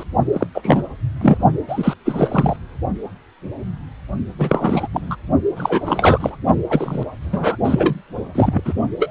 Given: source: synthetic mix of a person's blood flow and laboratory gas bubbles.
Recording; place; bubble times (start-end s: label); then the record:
Doppler ultrasound of blood flow; precordium
0.00-0.03 s: bubbles
0.33-0.47 s: bubbles
0.54-0.82 s: bubbles
1.21-1.38 s: bubbles
1.68-1.94 s: bubbles
2.05-2.56 s: bubbles
4.38-4.88 s: bubbles
4.92-5.16 s: bubbles
5.56-6.36 s: bubbles
6.69-7.03 s: bubbles
7.21-7.57 s: bubbles
7.64-7.95 s: bubbles
8.35-8.61 s: bubbles
8.65-8.73 s: bubbles
8.99-9.11 s: bubbles
From the record:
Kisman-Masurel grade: 333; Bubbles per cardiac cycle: rolling drumbeat, 9 or more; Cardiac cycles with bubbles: 50 to 99%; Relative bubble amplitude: loud (0.450 to 0.775); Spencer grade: 3 (all of the cardiac periods contain showers or single bubble signals, but not dominating or overriding the cardiac motion signals); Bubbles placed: only in the low amplitude regions of the cardiac cycle